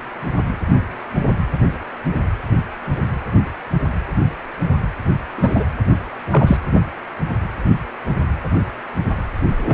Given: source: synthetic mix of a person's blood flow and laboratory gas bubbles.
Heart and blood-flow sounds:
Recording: Doppler ultrasound of blood flow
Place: precordium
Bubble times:
5.37-5.64 s: bubbles
6.32-6.57 s: bubbles
9.63-9.73 s: bubbles
From the record:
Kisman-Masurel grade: 123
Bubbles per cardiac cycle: 1 to 2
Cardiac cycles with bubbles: 10 to 50%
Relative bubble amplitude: loud (0.450 to 0.775)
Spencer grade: 2 (many but less than half of the cardiac periods contain bubble signals, singularly or in groups)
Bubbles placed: anywhere in the cardiac cycle

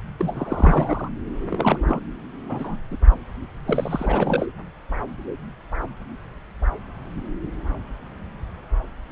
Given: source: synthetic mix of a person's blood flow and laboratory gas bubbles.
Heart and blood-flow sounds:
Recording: Doppler ultrasound of blood flow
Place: subclavian vein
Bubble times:
0.18-1.08 s: bubbles
1.50-1.79 s: bubbles
1.84-2.02 s: bubbles
2.49-2.77 s: bubbles
2.91-2.97 s: bubbles
3.66-4.47 s: bubbles
From the record:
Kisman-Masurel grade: 332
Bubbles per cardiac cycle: rolling drumbeat, 9 or more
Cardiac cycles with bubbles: 50 to 99%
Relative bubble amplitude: moderate (0.250 to 0.450)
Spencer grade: 3 (all of the cardiac periods contain showers or single bubble signals, but not dominating or overriding the cardiac motion signals)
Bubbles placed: anywhere in the cardiac cycle

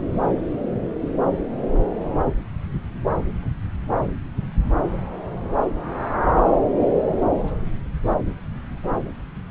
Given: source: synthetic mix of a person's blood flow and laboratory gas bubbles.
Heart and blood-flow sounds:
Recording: Doppler ultrasound of blood flow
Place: subclavian vein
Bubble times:
no bubbles
From the record:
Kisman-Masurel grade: 000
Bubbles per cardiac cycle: 0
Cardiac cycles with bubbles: 0%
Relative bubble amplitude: no bubbles discernible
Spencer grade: 0 (complete lack of bubble signals)

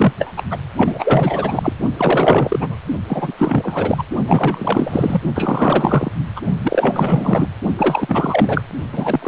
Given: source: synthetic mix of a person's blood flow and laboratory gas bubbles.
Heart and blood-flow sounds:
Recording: Doppler ultrasound of blood flow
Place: precordium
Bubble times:
0.00-0.13 s: bubbles
0.18-0.34 s: bubbles
0.36-0.43 s: bubbles
0.50-0.57 s: bubbles
0.77-1.72 s: bubbles
1.97-2.76 s: bubbles
3.07-3.33 s: bubbles
3.38-4.04 s: bubbles
4.26-5.21 s: bubbles
5.35-6.12 s: bubbles
6.35-6.41 s: bubbles
6.63-7.48 s: bubbles
7.77-8.62 s: bubbles
8.92-9.28 s: bubbles
From the record:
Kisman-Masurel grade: 444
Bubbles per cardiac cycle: continuous sound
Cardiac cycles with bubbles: 100%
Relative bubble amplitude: maximal (0.775 to 0.999)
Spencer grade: 4 (maximum detectable bubble signal sounding continuously throughout systole and diastole of every cardiac period, and overriding the amplitude of the normal cardiac signals)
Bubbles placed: only in the low amplitude regions of the cardiac cycle

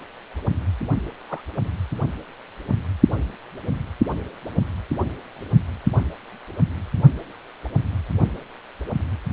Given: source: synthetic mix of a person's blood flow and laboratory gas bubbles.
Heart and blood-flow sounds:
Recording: Doppler ultrasound of blood flow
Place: precordium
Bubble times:
1.29-1.42 s: bubbles
5.90-6.04 s: bubbles
From the record:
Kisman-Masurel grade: 121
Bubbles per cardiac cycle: 1 to 2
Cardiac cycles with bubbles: 10 to 50%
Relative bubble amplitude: barely perceptible (0.100 to 0.250)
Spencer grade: 2 (many but less than half of the cardiac periods contain bubble signals, singularly or in groups)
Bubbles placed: only in the low amplitude regions of the cardiac cycle

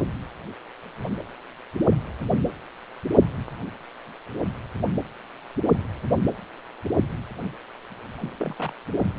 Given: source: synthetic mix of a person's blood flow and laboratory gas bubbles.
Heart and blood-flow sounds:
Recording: Doppler ultrasound of blood flow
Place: precordium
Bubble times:
8.21-8.36 s: bubbles
8.38-8.54 s: bubbles
8.59-8.71 s: bubbles
From the record:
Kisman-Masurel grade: 211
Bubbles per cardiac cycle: several, 3 to 8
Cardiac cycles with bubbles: 1 to 10%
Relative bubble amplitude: barely perceptible (0.100 to 0.250)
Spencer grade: 1 (occasional bubble signal discernible with the cardiac motion signal, with majority of cardiac periods free of bubbles)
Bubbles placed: anywhere in the cardiac cycle

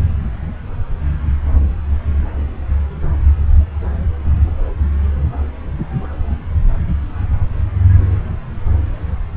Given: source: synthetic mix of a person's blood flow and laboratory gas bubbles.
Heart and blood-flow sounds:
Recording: Doppler ultrasound of blood flow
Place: subclavian vein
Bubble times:
no bubbles
From the record:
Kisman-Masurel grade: 000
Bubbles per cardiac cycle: 0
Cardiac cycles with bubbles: 0%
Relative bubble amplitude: no bubbles discernible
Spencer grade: 0 (complete lack of bubble signals)

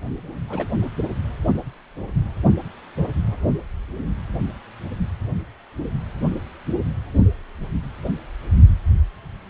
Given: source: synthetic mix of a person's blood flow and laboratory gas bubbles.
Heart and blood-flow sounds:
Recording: Doppler ultrasound of blood flow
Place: precordium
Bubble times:
0.48-0.76 s: bubbles
0.80-0.91 s: bubbles
From the record:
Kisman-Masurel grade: 211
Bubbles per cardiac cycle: several, 3 to 8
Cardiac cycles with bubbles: 1 to 10%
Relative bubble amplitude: barely perceptible (0.100 to 0.250)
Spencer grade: 1 (occasional bubble signal discernible with the cardiac motion signal, with majority of cardiac periods free of bubbles)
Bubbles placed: only in the low amplitude regions of the cardiac cycle

